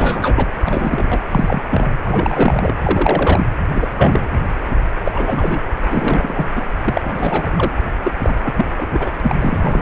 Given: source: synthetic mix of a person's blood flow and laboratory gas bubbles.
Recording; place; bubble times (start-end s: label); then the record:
Doppler ultrasound of blood flow; precordium
0.00-0.47 s: bubbles
0.64-1.21 s: bubbles
1.29-1.60 s: bubbles
1.70-1.86 s: bubbles
2.05-2.73 s: bubbles
2.83-3.43 s: bubbles
3.75-4.29 s: bubbles
5.04-5.67 s: bubbles
5.83-6.47 s: bubbles
6.55-6.62 s: bubbles
6.84-7.51 s: bubbles
7.56-7.72 s: bubbles
8.04-8.12 s: bubbles
8.23-8.34 s: bubbles
8.43-9.11 s: bubbles
9.22-9.36 s: bubbles
9.39-9.82 s: bubbles
From the record:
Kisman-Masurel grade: 333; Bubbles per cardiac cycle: rolling drumbeat, 9 or more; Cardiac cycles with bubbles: 50 to 99%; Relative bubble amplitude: loud (0.450 to 0.775); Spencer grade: 3 (all of the cardiac periods contain showers or single bubble signals, but not dominating or overriding the cardiac motion signals); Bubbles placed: anywhere in the cardiac cycle